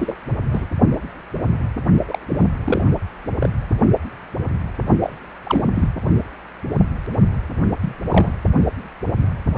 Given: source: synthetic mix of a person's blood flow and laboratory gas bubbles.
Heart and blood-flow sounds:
Doppler ultrasound of blood flow; precordium
0.00-0.15 s: bubbles
0.51-0.66 s: bubbles
2.08-2.19 s: bubbles
2.29-2.47 s: bubbles
2.64-2.85 s: bubbles
3.39-3.50 s: bubbles
5.01-5.12 s: bubbles
5.43-5.63 s: bubbles
5.75-5.88 s: bubbles
7.81-7.95 s: bubbles
8.11-8.34 s: bubbles
From the record:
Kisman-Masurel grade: 222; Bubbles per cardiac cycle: several, 3 to 8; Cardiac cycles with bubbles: 10 to 50%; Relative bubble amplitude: moderate (0.250 to 0.450); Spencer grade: 2 (many but less than half of the cardiac periods contain bubble signals, singularly or in groups); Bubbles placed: only in the low amplitude regions of the cardiac cycle

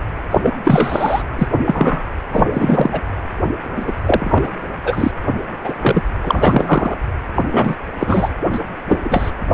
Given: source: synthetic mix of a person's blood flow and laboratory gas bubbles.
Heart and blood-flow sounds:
Doppler ultrasound of blood flow; precordium
0.30-0.39 s: bubbles
0.43-0.58 s: bubbles
0.64-1.22 s: bubbles
1.38-1.48 s: bubbles
1.65-2.05 s: bubbles
2.32-2.47 s: bubbles
2.53-3.01 s: bubbles
3.76-3.92 s: bubbles
4.05-4.48 s: bubbles
4.84-5.12 s: bubbles
5.64-5.74 s: bubbles
5.81-6.05 s: bubbles
6.21-6.97 s: bubbles
7.36-7.43 s: bubbles
7.50-7.75 s: bubbles
7.98-8.29 s: bubbles
8.53-8.59 s: bubbles
8.88-9.31 s: bubbles
From the record:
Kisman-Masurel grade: 233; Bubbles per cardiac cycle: several, 3 to 8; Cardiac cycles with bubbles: 50 to 99%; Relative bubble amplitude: loud (0.450 to 0.775); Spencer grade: 3 (all of the cardiac periods contain showers or single bubble signals, but not dominating or overriding the cardiac motion signals); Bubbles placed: anywhere in the cardiac cycle

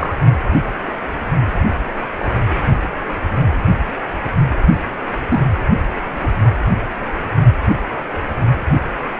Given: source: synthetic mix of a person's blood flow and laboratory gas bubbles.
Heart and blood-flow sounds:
Doppler ultrasound of blood flow; precordium
0.00-0.15 s: bubbles
2.19-2.25 s: bubbles
5.28-5.42 s: bubbles
6.19-6.32 s: bubbles
From the record:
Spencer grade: 2 (many but less than half of the cardiac periods contain bubble signals, singularly or in groups); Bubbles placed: anywhere in the cardiac cycle

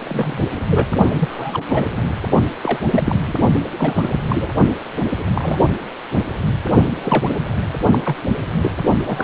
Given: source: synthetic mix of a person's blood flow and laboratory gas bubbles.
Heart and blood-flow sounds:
Doppler ultrasound of blood flow; precordium
0.05-0.39 s: bubbles
0.70-0.96 s: bubbles
1.19-1.64 s: bubbles
1.69-1.88 s: bubbles
1.97-2.18 s: bubbles
2.61-2.80 s: bubbles
2.91-3.17 s: bubbles
3.26-3.33 s: bubbles
3.78-4.19 s: bubbles
4.29-4.48 s: bubbles
5.11-5.23 s: bubbles
5.35-5.65 s: bubbles
5.67-5.80 s: bubbles
7.02-7.30 s: bubbles
7.91-7.99 s: bubbles
8.05-8.15 s: bubbles
8.61-8.72 s: bubbles
9.04-9.24 s: bubbles
From the record:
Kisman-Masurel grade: 242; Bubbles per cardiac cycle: several, 3 to 8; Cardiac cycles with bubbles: 100%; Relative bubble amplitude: moderate (0.250 to 0.450); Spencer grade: 3 (all of the cardiac periods contain showers or single bubble signals, but not dominating or overriding the cardiac motion signals); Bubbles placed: only in the low amplitude regions of the cardiac cycle

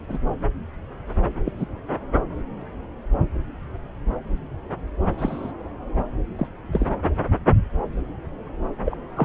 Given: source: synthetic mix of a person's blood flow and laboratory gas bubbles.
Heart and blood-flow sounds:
Doppler ultrasound of blood flow; subclavian vein
0.10-0.18 s: bubbles
1.45-1.52 s: bubbles
1.56-1.66 s: bubbles
5.17-5.52 s: bubbles
6.38-6.47 s: bubbles
6.72-6.87 s: bubbles
8.85-8.98 s: bubbles
9.16-9.25 s: bubbles
From the record:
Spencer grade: 2 (many but less than half of the cardiac periods contain bubble signals, singularly or in groups); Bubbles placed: anywhere in the cardiac cycle

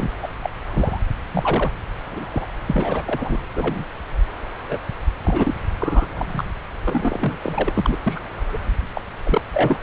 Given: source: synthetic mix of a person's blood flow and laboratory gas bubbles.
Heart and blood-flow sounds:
Doppler ultrasound of blood flow; subclavian vein
0.00-0.09 s: bubbles
0.22-0.28 s: bubbles
0.42-0.50 s: bubbles
0.68-1.00 s: bubbles
1.33-1.71 s: bubbles
2.10-2.26 s: bubbles
2.31-2.47 s: bubbles
2.68-3.47 s: bubbles
3.54-3.85 s: bubbles
4.69-4.79 s: bubbles
5.23-5.54 s: bubbles
5.80-6.44 s: bubbles
6.84-7.36 s: bubbles
7.42-7.97 s: bubbles
8.06-8.20 s: bubbles
8.53-8.58 s: bubbles
8.94-9.01 s: bubbles
9.26-9.42 s: bubbles
9.54-9.78 s: bubbles
From the record:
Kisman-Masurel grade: 242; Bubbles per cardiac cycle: several, 3 to 8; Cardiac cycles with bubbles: 100%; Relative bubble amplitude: moderate (0.250 to 0.450); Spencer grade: 3 (all of the cardiac periods contain showers or single bubble signals, but not dominating or overriding the cardiac motion signals); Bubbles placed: anywhere in the cardiac cycle

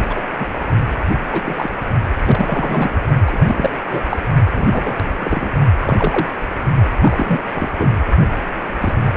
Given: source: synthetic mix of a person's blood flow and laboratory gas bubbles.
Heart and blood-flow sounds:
Doppler ultrasound of blood flow; precordium
0.09-0.20 s: bubbles
0.39-0.46 s: bubbles
1.31-1.42 s: bubbles
1.46-1.54 s: bubbles
1.57-1.71 s: bubbles
2.24-2.94 s: bubbles
3.27-3.70 s: bubbles
3.91-4.02 s: bubbles
4.10-4.17 s: bubbles
4.54-4.68 s: bubbles
4.71-4.96 s: bubbles
5.20-5.50 s: bubbles
5.80-6.27 s: bubbles
7.01-7.41 s: bubbles
7.54-7.69 s: bubbles
7.77-7.92 s: bubbles
8.81-8.93 s: bubbles
From the record:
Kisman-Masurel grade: 242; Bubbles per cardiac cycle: several, 3 to 8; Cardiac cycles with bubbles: 100%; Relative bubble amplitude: moderate (0.250 to 0.450); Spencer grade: 3 (all of the cardiac periods contain showers or single bubble signals, but not dominating or overriding the cardiac motion signals); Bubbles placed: only in the low amplitude regions of the cardiac cycle

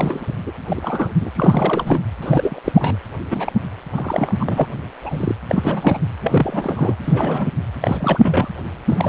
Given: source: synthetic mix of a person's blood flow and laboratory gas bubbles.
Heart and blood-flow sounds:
Doppler ultrasound of blood flow; precordium
0.00-0.33 s: bubbles
0.46-0.51 s: bubbles
0.66-1.13 s: bubbles
1.21-1.29 s: bubbles
1.35-2.00 s: bubbles
2.21-2.60 s: bubbles
2.64-2.72 s: bubbles
2.75-2.96 s: bubbles
3.30-3.52 s: bubbles
3.92-4.34 s: bubbles
4.39-4.67 s: bubbles
5.02-5.35 s: bubbles
5.50-6.00 s: bubbles
6.21-6.96 s: bubbles
7.02-7.51 s: bubbles
7.81-8.19 s: bubbles
8.22-8.49 s: bubbles
8.88-9.09 s: bubbles
From the record:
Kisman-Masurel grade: 332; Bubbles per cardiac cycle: rolling drumbeat, 9 or more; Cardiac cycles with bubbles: 50 to 99%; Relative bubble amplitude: moderate (0.250 to 0.450); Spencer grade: 3 (all of the cardiac periods contain showers or single bubble signals, but not dominating or overriding the cardiac motion signals); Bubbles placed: anywhere in the cardiac cycle

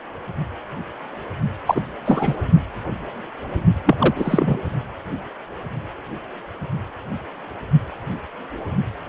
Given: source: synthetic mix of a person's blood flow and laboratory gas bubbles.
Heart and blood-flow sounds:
Doppler ultrasound of blood flow; precordium
1.67-1.81 s: bubbles
2.05-2.36 s: bubbles
3.85-4.58 s: bubbles
From the record:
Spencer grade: 2 (many but less than half of the cardiac periods contain bubble signals, singularly or in groups); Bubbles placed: only in the low amplitude regions of the cardiac cycle

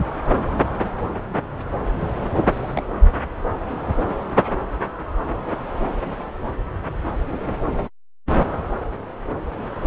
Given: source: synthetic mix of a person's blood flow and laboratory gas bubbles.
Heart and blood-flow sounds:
Doppler ultrasound of blood flow; subclavian vein
2.48-2.83 s: bubbles
From the record:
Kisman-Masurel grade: 211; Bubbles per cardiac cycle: several, 3 to 8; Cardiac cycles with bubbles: 1 to 10%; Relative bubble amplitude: barely perceptible (0.100 to 0.250); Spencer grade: 1 (occasional bubble signal discernible with the cardiac motion signal, with majority of cardiac periods free of bubbles); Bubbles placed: anywhere in the cardiac cycle

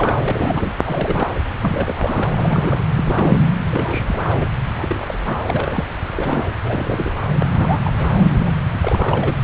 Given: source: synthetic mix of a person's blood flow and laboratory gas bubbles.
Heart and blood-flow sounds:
Doppler ultrasound of blood flow; subclavian vein
0.00-0.20 s: bubbles
0.22-0.72 s: bubbles
0.85-1.29 s: bubbles
1.60-2.28 s: bubbles
2.32-2.83 s: bubbles
2.96-3.37 s: bubbles
3.71-4.23 s: bubbles
4.27-4.48 s: bubbles
4.75-5.33 s: bubbles
5.42-5.86 s: bubbles
6.11-6.54 s: bubbles
6.63-7.11 s: bubbles
7.39-7.80 s: bubbles
7.84-8.55 s: bubbles
8.73-9.35 s: bubbles
From the record:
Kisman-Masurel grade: 342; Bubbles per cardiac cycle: rolling drumbeat, 9 or more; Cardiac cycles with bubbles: 100%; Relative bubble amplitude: moderate (0.250 to 0.450); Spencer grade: 3 (all of the cardiac periods contain showers or single bubble signals, but not dominating or overriding the cardiac motion signals); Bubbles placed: anywhere in the cardiac cycle

